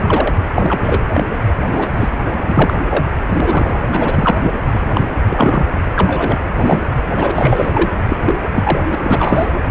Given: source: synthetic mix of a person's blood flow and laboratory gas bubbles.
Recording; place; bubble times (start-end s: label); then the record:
Doppler ultrasound of blood flow; precordium
0.07-0.34 s: bubbles
0.55-1.10 s: bubbles
1.14-1.23 s: bubbles
1.67-1.89 s: bubbles
1.97-2.08 s: bubbles
2.25-2.40 s: bubbles
2.46-2.73 s: bubbles
2.90-3.06 s: bubbles
3.34-3.81 s: bubbles
3.92-4.51 s: bubbles
4.67-5.11 s: bubbles
5.25-5.67 s: bubbles
5.96-6.41 s: bubbles
6.56-6.80 s: bubbles
7.10-7.32 s: bubbles
7.35-7.90 s: bubbles
8.10-8.36 s: bubbles
8.54-8.81 s: bubbles
8.91-9.50 s: bubbles
From the record:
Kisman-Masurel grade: 343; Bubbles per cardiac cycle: rolling drumbeat, 9 or more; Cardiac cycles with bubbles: 100%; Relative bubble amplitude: loud (0.450 to 0.775); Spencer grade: 3 (all of the cardiac periods contain showers or single bubble signals, but not dominating or overriding the cardiac motion signals); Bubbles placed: anywhere in the cardiac cycle